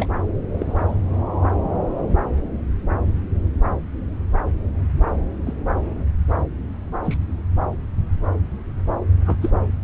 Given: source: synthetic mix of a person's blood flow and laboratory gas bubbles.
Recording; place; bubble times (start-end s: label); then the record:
Doppler ultrasound of blood flow; subclavian vein
0.00-0.07 s: bubbles
0.56-0.94 s: bubbles
5.46-5.54 s: bubbles
7.04-7.17 s: bubbles
9.26-9.37 s: bubbles
9.41-9.50 s: bubbles
From the record:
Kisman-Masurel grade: 122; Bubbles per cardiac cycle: 1 to 2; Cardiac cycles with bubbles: 10 to 50%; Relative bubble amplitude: moderate (0.250 to 0.450); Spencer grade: 2 (many but less than half of the cardiac periods contain bubble signals, singularly or in groups); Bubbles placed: anywhere in the cardiac cycle